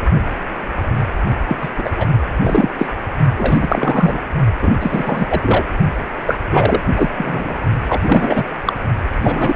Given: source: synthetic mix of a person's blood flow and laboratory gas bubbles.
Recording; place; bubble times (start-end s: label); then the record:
Doppler ultrasound of blood flow; precordium
1.48-1.56 s: bubbles
1.61-1.70 s: bubbles
1.78-1.91 s: bubbles
1.96-2.07 s: bubbles
2.41-2.71 s: bubbles
2.79-2.90 s: bubbles
3.37-3.58 s: bubbles
3.61-4.22 s: bubbles
4.62-4.74 s: bubbles
4.80-5.26 s: bubbles
5.29-5.66 s: bubbles
6.26-6.38 s: bubbles
6.52-6.81 s: bubbles
6.95-7.10 s: bubbles
7.17-7.54 s: bubbles
7.88-8.02 s: bubbles
8.06-8.46 s: bubbles
8.64-8.73 s: bubbles
9.21-9.56 s: bubbles
From the record:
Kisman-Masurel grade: 333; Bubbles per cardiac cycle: rolling drumbeat, 9 or more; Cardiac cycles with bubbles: 50 to 99%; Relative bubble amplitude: loud (0.450 to 0.775); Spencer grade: 3 (all of the cardiac periods contain showers or single bubble signals, but not dominating or overriding the cardiac motion signals); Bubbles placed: only in the low amplitude regions of the cardiac cycle